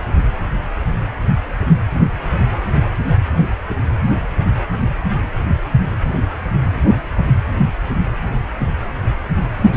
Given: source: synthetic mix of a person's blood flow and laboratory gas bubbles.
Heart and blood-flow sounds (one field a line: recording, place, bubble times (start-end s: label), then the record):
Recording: Doppler ultrasound of blood flow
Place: precordium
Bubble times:
9.62-9.77 s: bubbles
From the record:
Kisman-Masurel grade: 113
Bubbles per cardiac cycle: 1 to 2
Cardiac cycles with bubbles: 1 to 10%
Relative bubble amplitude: loud (0.450 to 0.775)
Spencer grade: 1 (occasional bubble signal discernible with the cardiac motion signal, with majority of cardiac periods free of bubbles)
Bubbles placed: anywhere in the cardiac cycle